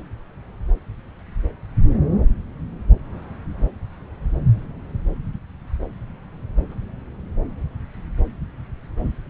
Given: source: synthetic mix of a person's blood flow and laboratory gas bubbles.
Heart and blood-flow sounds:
Doppler ultrasound of blood flow; subclavian vein
no bubbles
From the record:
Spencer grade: 0 (complete lack of bubble signals)

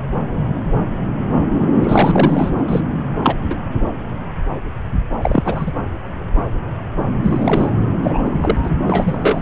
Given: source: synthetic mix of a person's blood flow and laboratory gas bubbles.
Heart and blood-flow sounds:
Doppler ultrasound of blood flow; subclavian vein
1.82-2.51 s: bubbles
2.68-2.81 s: bubbles
3.22-3.36 s: bubbles
3.49-3.56 s: bubbles
5.21-5.73 s: bubbles
7.23-7.71 s: bubbles
8.02-8.31 s: bubbles
8.40-8.57 s: bubbles
8.63-8.71 s: bubbles
8.88-9.41 s: bubbles
From the record:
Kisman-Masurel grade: 233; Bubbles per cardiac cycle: several, 3 to 8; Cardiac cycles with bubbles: 50 to 99%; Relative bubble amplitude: loud (0.450 to 0.775); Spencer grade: 3 (all of the cardiac periods contain showers or single bubble signals, but not dominating or overriding the cardiac motion signals); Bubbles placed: anywhere in the cardiac cycle

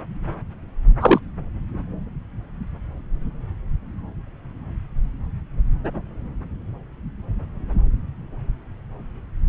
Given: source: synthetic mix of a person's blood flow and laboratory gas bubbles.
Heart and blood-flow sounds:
Doppler ultrasound of blood flow; subclavian vein
1.00-1.20 s: bubbles
From the record:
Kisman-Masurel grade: 113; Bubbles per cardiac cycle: 1 to 2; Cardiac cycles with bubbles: 1 to 10%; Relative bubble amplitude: loud (0.450 to 0.775); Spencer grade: 1 (occasional bubble signal discernible with the cardiac motion signal, with majority of cardiac periods free of bubbles); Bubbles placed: anywhere in the cardiac cycle

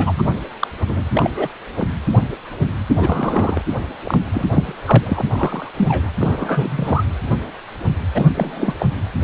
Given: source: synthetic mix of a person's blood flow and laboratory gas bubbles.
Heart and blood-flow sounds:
Doppler ultrasound of blood flow; precordium
0.00-0.22 s: bubbles
0.59-0.67 s: bubbles
0.88-1.03 s: bubbles
1.13-1.31 s: bubbles
1.37-1.48 s: bubbles
1.78-1.87 s: bubbles
2.98-3.61 s: bubbles
4.05-4.17 s: bubbles
4.32-4.46 s: bubbles
4.53-4.73 s: bubbles
4.85-5.23 s: bubbles
5.30-5.71 s: bubbles
5.76-6.10 s: bubbles
6.19-7.04 s: bubbles
8.13-8.26 s: bubbles
8.34-8.74 s: bubbles
8.79-8.86 s: bubbles
From the record:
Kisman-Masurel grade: 232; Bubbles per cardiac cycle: several, 3 to 8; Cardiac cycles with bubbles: 50 to 99%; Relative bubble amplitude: moderate (0.250 to 0.450); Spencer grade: 3 (all of the cardiac periods contain showers or single bubble signals, but not dominating or overriding the cardiac motion signals); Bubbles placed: anywhere in the cardiac cycle

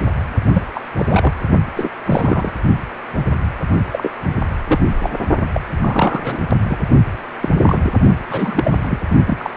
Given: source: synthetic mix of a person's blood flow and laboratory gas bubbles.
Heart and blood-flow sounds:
Doppler ultrasound of blood flow; precordium
0.53-0.62 s: bubbles
0.74-0.81 s: bubbles
0.97-1.33 s: bubbles
1.76-1.90 s: bubbles
2.05-2.53 s: bubbles
3.91-4.10 s: bubbles
4.68-4.79 s: bubbles
5.00-5.10 s: bubbles
5.54-5.61 s: bubbles
5.81-6.43 s: bubbles
6.62-6.77 s: bubbles
7.41-7.50 s: bubbles
7.62-7.79 s: bubbles
7.83-7.91 s: bubbles
8.29-9.00 s: bubbles
9.26-9.50 s: bubbles
From the record:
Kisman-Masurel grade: 232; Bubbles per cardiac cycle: several, 3 to 8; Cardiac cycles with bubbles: 50 to 99%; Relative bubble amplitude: moderate (0.250 to 0.450); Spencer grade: 3 (all of the cardiac periods contain showers or single bubble signals, but not dominating or overriding the cardiac motion signals); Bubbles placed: only in the low amplitude regions of the cardiac cycle

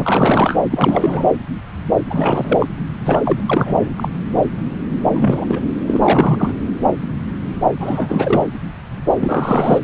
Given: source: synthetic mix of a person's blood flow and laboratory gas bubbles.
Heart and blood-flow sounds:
Doppler ultrasound of blood flow; subclavian vein
0.00-0.59 s: bubbles
0.71-1.25 s: bubbles
2.10-2.67 s: bubbles
3.05-3.21 s: bubbles
3.24-3.41 s: bubbles
3.46-3.90 s: bubbles
3.96-4.08 s: bubbles
5.08-5.61 s: bubbles
5.86-6.00 s: bubbles
6.02-6.54 s: bubbles
7.79-8.44 s: bubbles
9.19-9.79 s: bubbles
From the record:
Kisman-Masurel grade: 333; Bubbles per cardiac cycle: rolling drumbeat, 9 or more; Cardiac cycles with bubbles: 50 to 99%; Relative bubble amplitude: loud (0.450 to 0.775); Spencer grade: 3 (all of the cardiac periods contain showers or single bubble signals, but not dominating or overriding the cardiac motion signals); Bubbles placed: anywhere in the cardiac cycle

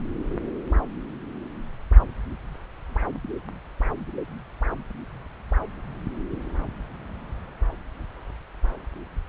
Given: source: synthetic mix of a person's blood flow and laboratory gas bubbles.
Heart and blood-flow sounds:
Doppler ultrasound of blood flow; subclavian vein
no bubbles
From the record:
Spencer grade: 0 (complete lack of bubble signals)

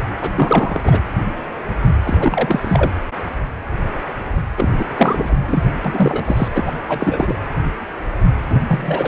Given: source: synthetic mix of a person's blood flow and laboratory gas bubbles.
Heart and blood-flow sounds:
Doppler ultrasound of blood flow; precordium
0.21-0.31 s: bubbles
0.35-0.81 s: bubbles
0.83-1.01 s: bubbles
2.04-2.90 s: bubbles
4.57-4.69 s: bubbles
4.79-4.85 s: bubbles
4.96-5.36 s: bubbles
5.46-5.62 s: bubbles
5.85-6.49 s: bubbles
6.54-6.75 s: bubbles
6.88-7.38 s: bubbles
8.48-8.62 s: bubbles
8.68-9.08 s: bubbles
From the record:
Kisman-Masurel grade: 333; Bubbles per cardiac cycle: rolling drumbeat, 9 or more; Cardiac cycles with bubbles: 50 to 99%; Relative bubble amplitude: loud (0.450 to 0.775); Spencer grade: 3 (all of the cardiac periods contain showers or single bubble signals, but not dominating or overriding the cardiac motion signals); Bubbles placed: anywhere in the cardiac cycle

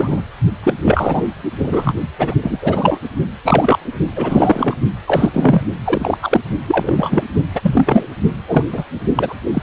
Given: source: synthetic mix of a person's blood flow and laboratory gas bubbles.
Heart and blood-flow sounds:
Doppler ultrasound of blood flow; precordium
0.00-0.21 s: bubbles
0.63-0.73 s: bubbles
0.84-1.27 s: bubbles
1.59-1.94 s: bubbles
2.19-2.34 s: bubbles
2.42-2.98 s: bubbles
3.44-3.79 s: bubbles
4.15-4.75 s: bubbles
5.07-5.30 s: bubbles
5.34-5.62 s: bubbles
5.84-6.18 s: bubbles
6.21-6.40 s: bubbles
6.67-7.24 s: bubbles
7.54-8.08 s: bubbles
8.47-8.64 s: bubbles
8.72-8.84 s: bubbles
9.15-9.34 s: bubbles
9.54-9.63 s: bubbles
From the record:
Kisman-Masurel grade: 233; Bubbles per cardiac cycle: several, 3 to 8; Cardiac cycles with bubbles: 50 to 99%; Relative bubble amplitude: loud (0.450 to 0.775); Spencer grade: 3 (all of the cardiac periods contain showers or single bubble signals, but not dominating or overriding the cardiac motion signals); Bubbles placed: only in the low amplitude regions of the cardiac cycle

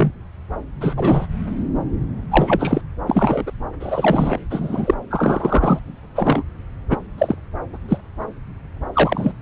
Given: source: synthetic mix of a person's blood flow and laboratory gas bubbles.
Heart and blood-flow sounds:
Doppler ultrasound of blood flow; subclavian vein
0.00-0.11 s: bubbles
0.80-1.27 s: bubbles
2.31-2.81 s: bubbles
3.07-3.44 s: bubbles
3.46-3.52 s: bubbles
3.80-4.38 s: bubbles
4.50-4.94 s: bubbles
5.10-5.79 s: bubbles
6.15-6.43 s: bubbles
6.90-6.97 s: bubbles
7.17-7.37 s: bubbles
7.73-7.78 s: bubbles
7.89-7.98 s: bubbles
8.94-9.33 s: bubbles
From the record:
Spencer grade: 3 (all of the cardiac periods contain showers or single bubble signals, but not dominating or overriding the cardiac motion signals); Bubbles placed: anywhere in the cardiac cycle

